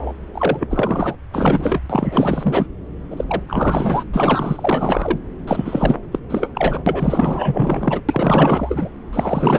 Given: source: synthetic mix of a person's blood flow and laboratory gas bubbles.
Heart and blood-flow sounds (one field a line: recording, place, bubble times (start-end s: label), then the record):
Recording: Doppler ultrasound of blood flow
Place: subclavian vein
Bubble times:
0.00-0.13 s: bubbles
0.34-1.15 s: bubbles
1.31-1.80 s: bubbles
1.90-2.66 s: bubbles
3.10-3.25 s: bubbles
3.27-3.42 s: bubbles
3.48-4.04 s: bubbles
4.13-5.19 s: bubbles
5.47-5.98 s: bubbles
6.12-6.19 s: bubbles
6.29-6.50 s: bubbles
6.54-8.01 s: bubbles
8.08-8.89 s: bubbles
9.12-9.59 s: bubbles
From the record:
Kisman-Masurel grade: 444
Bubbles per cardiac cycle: continuous sound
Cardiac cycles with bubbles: 100%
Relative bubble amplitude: maximal (0.775 to 0.999)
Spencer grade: 4 (maximum detectable bubble signal sounding continuously throughout systole and diastole of every cardiac period, and overriding the amplitude of the normal cardiac signals)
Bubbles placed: anywhere in the cardiac cycle